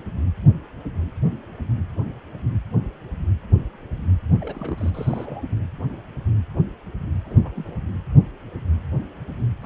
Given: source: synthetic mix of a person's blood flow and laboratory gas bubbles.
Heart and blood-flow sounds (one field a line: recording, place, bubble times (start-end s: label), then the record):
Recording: Doppler ultrasound of blood flow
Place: precordium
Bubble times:
4.41-4.91 s: bubbles
4.94-5.42 s: bubbles
5.49-5.57 s: bubbles
7.24-7.38 s: bubbles
7.44-7.81 s: bubbles
9.62-9.66 s: bubbles
From the record:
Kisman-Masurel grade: 221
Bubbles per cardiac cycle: several, 3 to 8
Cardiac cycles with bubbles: 10 to 50%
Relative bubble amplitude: barely perceptible (0.100 to 0.250)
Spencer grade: 2 (many but less than half of the cardiac periods contain bubble signals, singularly or in groups)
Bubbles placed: anywhere in the cardiac cycle